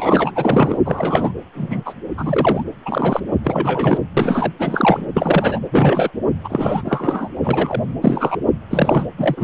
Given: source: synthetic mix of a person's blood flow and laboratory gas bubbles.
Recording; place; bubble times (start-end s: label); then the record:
Doppler ultrasound of blood flow; precordium
0.00-0.32 s: bubbles
0.35-0.78 s: bubbles
0.84-1.31 s: bubbles
1.54-1.93 s: bubbles
2.17-2.63 s: bubbles
2.86-3.21 s: bubbles
3.43-3.98 s: bubbles
4.17-4.53 s: bubbles
4.59-5.05 s: bubbles
5.14-5.59 s: bubbles
5.71-6.11 s: bubbles
6.44-6.82 s: bubbles
6.85-7.29 s: bubbles
7.42-7.83 s: bubbles
8.02-8.37 s: bubbles
8.71-9.06 s: bubbles
9.17-9.44 s: bubbles
From the record:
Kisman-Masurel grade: 243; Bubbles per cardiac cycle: several, 3 to 8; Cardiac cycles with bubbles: 100%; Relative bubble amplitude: loud (0.450 to 0.775); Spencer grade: 3 (all of the cardiac periods contain showers or single bubble signals, but not dominating or overriding the cardiac motion signals); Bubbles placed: anywhere in the cardiac cycle